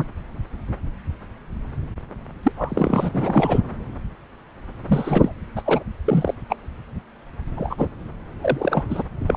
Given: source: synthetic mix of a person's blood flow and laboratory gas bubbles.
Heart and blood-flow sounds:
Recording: Doppler ultrasound of blood flow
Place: subclavian vein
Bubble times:
2.43-2.52 s: bubbles
2.58-3.10 s: bubbles
3.12-3.61 s: bubbles
4.88-5.33 s: bubbles
5.56-5.62 s: bubbles
5.65-5.81 s: bubbles
6.04-6.34 s: bubbles
6.50-6.56 s: bubbles
7.56-7.87 s: bubbles
8.41-8.83 s: bubbles
8.90-9.03 s: bubbles
9.26-9.37 s: bubbles
From the record:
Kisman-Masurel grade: 232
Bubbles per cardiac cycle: several, 3 to 8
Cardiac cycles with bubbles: 50 to 99%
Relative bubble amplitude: moderate (0.250 to 0.450)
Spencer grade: 3 (all of the cardiac periods contain showers or single bubble signals, but not dominating or overriding the cardiac motion signals)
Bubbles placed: anywhere in the cardiac cycle

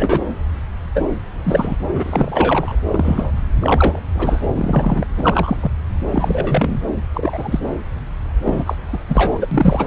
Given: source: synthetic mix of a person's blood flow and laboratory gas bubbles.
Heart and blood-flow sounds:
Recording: Doppler ultrasound of blood flow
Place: subclavian vein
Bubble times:
0.00-0.20 s: bubbles
0.94-1.04 s: bubbles
1.43-1.77 s: bubbles
1.93-2.76 s: bubbles
2.88-3.31 s: bubbles
3.61-4.00 s: bubbles
4.15-4.42 s: bubbles
4.55-5.07 s: bubbles
5.16-5.57 s: bubbles
5.60-5.71 s: bubbles
6.11-6.79 s: bubbles
7.14-7.60 s: bubbles
8.45-8.75 s: bubbles
8.93-8.98 s: bubbles
9.08-9.38 s: bubbles
9.41-9.47 s: bubbles
9.51-9.87 s: bubbles
From the record:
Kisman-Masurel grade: 243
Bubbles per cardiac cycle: several, 3 to 8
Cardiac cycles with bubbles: 100%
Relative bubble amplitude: loud (0.450 to 0.775)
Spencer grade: 3 (all of the cardiac periods contain showers or single bubble signals, but not dominating or overriding the cardiac motion signals)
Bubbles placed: anywhere in the cardiac cycle

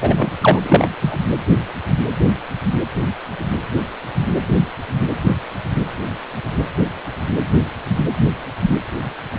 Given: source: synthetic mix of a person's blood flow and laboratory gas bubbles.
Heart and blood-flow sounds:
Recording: Doppler ultrasound of blood flow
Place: precordium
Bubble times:
0.01-0.32 s: bubbles
0.41-0.59 s: bubbles
0.64-0.89 s: bubbles
1.01-1.18 s: bubbles
From the record:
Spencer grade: 2 (many but less than half of the cardiac periods contain bubble signals, singularly or in groups)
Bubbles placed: anywhere in the cardiac cycle

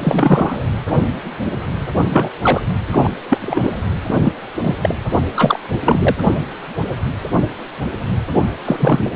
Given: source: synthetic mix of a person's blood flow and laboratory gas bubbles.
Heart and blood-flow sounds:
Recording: Doppler ultrasound of blood flow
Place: precordium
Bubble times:
0.00-0.66 s: bubbles
2.09-2.29 s: bubbles
2.42-2.62 s: bubbles
2.92-3.10 s: bubbles
3.29-3.77 s: bubbles
4.07-4.32 s: bubbles
4.62-4.75 s: bubbles
4.83-4.95 s: bubbles
5.36-5.59 s: bubbles
5.84-6.16 s: bubbles
8.65-9.09 s: bubbles
From the record:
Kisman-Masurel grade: 233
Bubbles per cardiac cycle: several, 3 to 8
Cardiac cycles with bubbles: 50 to 99%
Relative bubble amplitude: loud (0.450 to 0.775)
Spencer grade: 3 (all of the cardiac periods contain showers or single bubble signals, but not dominating or overriding the cardiac motion signals)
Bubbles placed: only in the low amplitude regions of the cardiac cycle

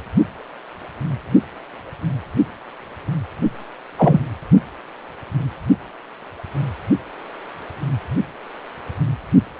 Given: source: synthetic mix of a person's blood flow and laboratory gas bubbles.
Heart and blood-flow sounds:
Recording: Doppler ultrasound of blood flow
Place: precordium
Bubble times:
3.98-4.19 s: bubbles
From the record:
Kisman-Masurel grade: 123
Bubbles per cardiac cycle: 1 to 2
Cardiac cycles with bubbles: 10 to 50%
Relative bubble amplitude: loud (0.450 to 0.775)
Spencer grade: 2 (many but less than half of the cardiac periods contain bubble signals, singularly or in groups)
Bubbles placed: only in the low amplitude regions of the cardiac cycle

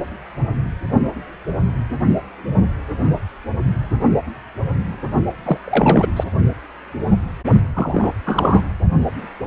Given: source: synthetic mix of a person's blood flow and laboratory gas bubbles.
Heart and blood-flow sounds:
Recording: Doppler ultrasound of blood flow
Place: precordium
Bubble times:
5.44-5.58 s: bubbles
5.64-6.07 s: bubbles
6.16-6.24 s: bubbles
7.75-8.12 s: bubbles
8.25-8.62 s: bubbles
From the record:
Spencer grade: 2 (many but less than half of the cardiac periods contain bubble signals, singularly or in groups)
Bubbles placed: only in the low amplitude regions of the cardiac cycle

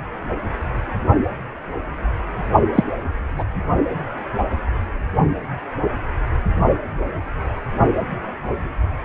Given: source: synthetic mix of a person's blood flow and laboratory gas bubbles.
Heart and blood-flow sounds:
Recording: Doppler ultrasound of blood flow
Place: precordium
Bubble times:
2.75-2.83 s: bubbles
3.37-3.44 s: bubbles
From the record:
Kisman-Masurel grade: 113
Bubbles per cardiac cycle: 1 to 2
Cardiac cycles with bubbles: 1 to 10%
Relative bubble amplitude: loud (0.450 to 0.775)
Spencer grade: 1 (occasional bubble signal discernible with the cardiac motion signal, with majority of cardiac periods free of bubbles)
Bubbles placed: only in the low amplitude regions of the cardiac cycle

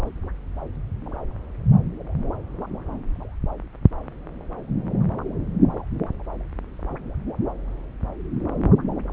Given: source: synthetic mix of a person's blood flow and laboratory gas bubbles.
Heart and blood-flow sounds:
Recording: Doppler ultrasound of blood flow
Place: subclavian vein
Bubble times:
0.06-0.10 s: bubbles
From the record:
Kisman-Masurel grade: 211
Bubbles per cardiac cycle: several, 3 to 8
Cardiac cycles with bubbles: 1 to 10%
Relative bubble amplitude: barely perceptible (0.100 to 0.250)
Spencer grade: 1 (occasional bubble signal discernible with the cardiac motion signal, with majority of cardiac periods free of bubbles)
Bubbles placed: anywhere in the cardiac cycle

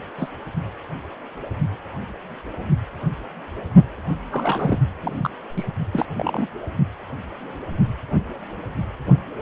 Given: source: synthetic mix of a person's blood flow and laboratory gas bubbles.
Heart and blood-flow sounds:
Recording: Doppler ultrasound of blood flow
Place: precordium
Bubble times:
0.18-0.31 s: bubbles
4.31-4.79 s: bubbles
5.02-5.30 s: bubbles
5.56-5.65 s: bubbles
5.92-6.05 s: bubbles
6.15-6.47 s: bubbles
From the record:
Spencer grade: 2 (many but less than half of the cardiac periods contain bubble signals, singularly or in groups)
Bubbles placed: only in the low amplitude regions of the cardiac cycle

